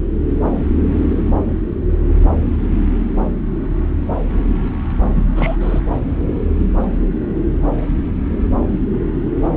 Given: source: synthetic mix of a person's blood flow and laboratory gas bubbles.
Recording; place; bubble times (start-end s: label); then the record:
Doppler ultrasound of blood flow; subclavian vein
5.15-5.22 s: bubbles
5.35-5.56 s: bubbles
5.60-5.81 s: bubbles
From the record:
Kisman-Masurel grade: 212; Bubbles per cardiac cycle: several, 3 to 8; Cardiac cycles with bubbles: 1 to 10%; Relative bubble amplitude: moderate (0.250 to 0.450); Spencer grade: 1 (occasional bubble signal discernible with the cardiac motion signal, with majority of cardiac periods free of bubbles); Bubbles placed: anywhere in the cardiac cycle